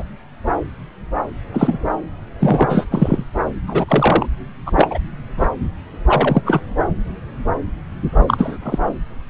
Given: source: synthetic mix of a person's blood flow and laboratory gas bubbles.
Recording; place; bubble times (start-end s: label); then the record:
Doppler ultrasound of blood flow; subclavian vein
0.00-0.03 s: bubbles
1.53-1.78 s: bubbles
2.40-2.85 s: bubbles
2.90-3.24 s: bubbles
3.67-3.85 s: bubbles
3.88-4.26 s: bubbles
4.66-4.71 s: bubbles
4.75-4.98 s: bubbles
5.38-5.47 s: bubbles
6.06-6.42 s: bubbles
6.45-6.60 s: bubbles
8.27-8.57 s: bubbles
8.63-8.79 s: bubbles
From the record:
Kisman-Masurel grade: 223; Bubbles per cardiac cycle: several, 3 to 8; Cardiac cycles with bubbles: 10 to 50%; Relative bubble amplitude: loud (0.450 to 0.775); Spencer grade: 2 (many but less than half of the cardiac periods contain bubble signals, singularly or in groups); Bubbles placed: anywhere in the cardiac cycle